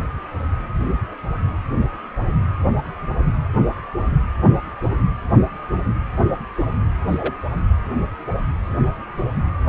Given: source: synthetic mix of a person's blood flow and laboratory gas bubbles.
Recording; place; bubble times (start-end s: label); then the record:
Doppler ultrasound of blood flow; precordium
7.08-7.33 s: bubbles
From the record:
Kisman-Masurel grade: 111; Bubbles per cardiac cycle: 1 to 2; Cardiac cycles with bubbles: 1 to 10%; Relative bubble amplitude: barely perceptible (0.100 to 0.250); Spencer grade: 1 (occasional bubble signal discernible with the cardiac motion signal, with majority of cardiac periods free of bubbles); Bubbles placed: anywhere in the cardiac cycle